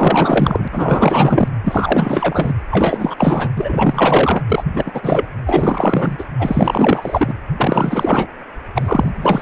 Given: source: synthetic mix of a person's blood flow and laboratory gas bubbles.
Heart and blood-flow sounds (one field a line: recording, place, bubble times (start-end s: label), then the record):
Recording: Doppler ultrasound of blood flow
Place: precordium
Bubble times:
0.00-0.68 s: bubbles
0.72-1.48 s: bubbles
1.63-2.53 s: bubbles
2.71-3.15 s: bubbles
3.18-3.49 s: bubbles
3.55-4.44 s: bubbles
4.50-4.63 s: bubbles
4.73-4.92 s: bubbles
4.94-5.28 s: bubbles
5.46-6.24 s: bubbles
6.39-7.34 s: bubbles
7.56-8.27 s: bubbles
8.75-9.11 s: bubbles
9.17-9.42 s: bubbles
From the record:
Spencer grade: 4 (maximum detectable bubble signal sounding continuously throughout systole and diastole of every cardiac period, and overriding the amplitude of the normal cardiac signals)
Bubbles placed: anywhere in the cardiac cycle